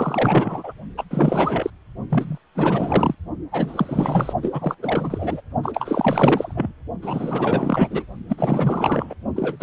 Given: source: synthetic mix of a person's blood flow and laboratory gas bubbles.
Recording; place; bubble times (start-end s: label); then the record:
Doppler ultrasound of blood flow; precordium
0.00-0.73 s: bubbles
0.97-1.04 s: bubbles
1.10-1.70 s: bubbles
2.09-2.38 s: bubbles
2.55-3.15 s: bubbles
3.52-4.33 s: bubbles
4.42-4.77 s: bubbles
4.83-5.41 s: bubbles
5.62-6.73 s: bubbles
7.02-8.05 s: bubbles
8.29-9.14 s: bubbles
9.36-9.57 s: bubbles
9.60-9.63 s: bubbles
From the record:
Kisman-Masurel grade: 444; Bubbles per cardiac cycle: continuous sound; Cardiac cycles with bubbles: 100%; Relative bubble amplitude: maximal (0.775 to 0.999); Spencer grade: 4 (maximum detectable bubble signal sounding continuously throughout systole and diastole of every cardiac period, and overriding the amplitude of the normal cardiac signals); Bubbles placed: only in the low amplitude regions of the cardiac cycle